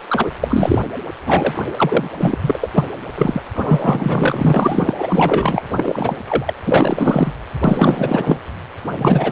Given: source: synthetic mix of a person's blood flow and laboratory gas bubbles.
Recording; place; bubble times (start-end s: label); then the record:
Doppler ultrasound of blood flow; precordium
0.08-0.34 s: bubbles
0.40-0.79 s: bubbles
1.26-1.65 s: bubbles
1.76-2.09 s: bubbles
2.19-2.38 s: bubbles
2.42-2.68 s: bubbles
2.75-2.85 s: bubbles
3.15-3.41 s: bubbles
3.55-4.94 s: bubbles
4.98-5.63 s: bubbles
5.69-6.14 s: bubbles
6.26-6.54 s: bubbles
6.64-7.34 s: bubbles
7.64-8.38 s: bubbles
8.98-9.32 s: bubbles
From the record:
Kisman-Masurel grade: 444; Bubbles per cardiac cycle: continuous sound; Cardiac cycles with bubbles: 100%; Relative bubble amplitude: maximal (0.775 to 0.999); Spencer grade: 4 (maximum detectable bubble signal sounding continuously throughout systole and diastole of every cardiac period, and overriding the amplitude of the normal cardiac signals); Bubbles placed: anywhere in the cardiac cycle